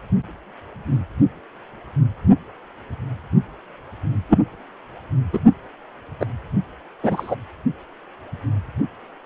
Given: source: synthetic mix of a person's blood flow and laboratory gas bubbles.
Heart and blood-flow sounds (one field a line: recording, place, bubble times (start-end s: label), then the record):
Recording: Doppler ultrasound of blood flow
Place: precordium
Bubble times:
4.29-4.38 s: bubbles
5.33-5.39 s: bubbles
6.20-6.26 s: bubbles
7.03-7.35 s: bubbles
From the record:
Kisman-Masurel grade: 123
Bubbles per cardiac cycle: 1 to 2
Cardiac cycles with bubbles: 10 to 50%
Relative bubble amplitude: loud (0.450 to 0.775)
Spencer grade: 2 (many but less than half of the cardiac periods contain bubble signals, singularly or in groups)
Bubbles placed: only in the low amplitude regions of the cardiac cycle